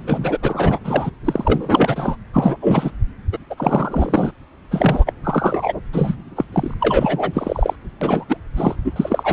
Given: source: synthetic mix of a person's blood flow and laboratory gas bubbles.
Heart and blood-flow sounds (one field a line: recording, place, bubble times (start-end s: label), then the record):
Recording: Doppler ultrasound of blood flow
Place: subclavian vein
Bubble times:
0.07-0.38 s: bubbles
0.42-0.79 s: bubbles
0.84-1.10 s: bubbles
1.25-2.17 s: bubbles
2.33-2.57 s: bubbles
2.61-2.91 s: bubbles
3.32-3.38 s: bubbles
3.50-3.55 s: bubbles
3.58-4.31 s: bubbles
4.71-5.13 s: bubbles
5.23-5.73 s: bubbles
5.92-6.15 s: bubbles
6.36-6.44 s: bubbles
6.52-6.75 s: bubbles
6.80-7.75 s: bubbles
8.01-8.24 s: bubbles
8.28-8.38 s: bubbles
8.56-8.75 s: bubbles
8.85-8.92 s: bubbles
8.96-9.33 s: bubbles
From the record:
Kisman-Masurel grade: 333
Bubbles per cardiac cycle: rolling drumbeat, 9 or more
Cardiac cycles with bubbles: 50 to 99%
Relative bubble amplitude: loud (0.450 to 0.775)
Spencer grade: 3 (all of the cardiac periods contain showers or single bubble signals, but not dominating or overriding the cardiac motion signals)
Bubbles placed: anywhere in the cardiac cycle